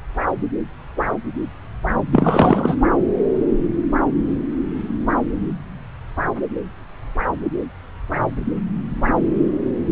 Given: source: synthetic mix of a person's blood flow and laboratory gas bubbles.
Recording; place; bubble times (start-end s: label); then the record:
Doppler ultrasound of blood flow; subclavian vein
2.12-2.75 s: bubbles
From the record:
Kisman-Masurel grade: 213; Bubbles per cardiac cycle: several, 3 to 8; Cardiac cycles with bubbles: 1 to 10%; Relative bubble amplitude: loud (0.450 to 0.775); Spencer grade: 1 (occasional bubble signal discernible with the cardiac motion signal, with majority of cardiac periods free of bubbles); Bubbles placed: anywhere in the cardiac cycle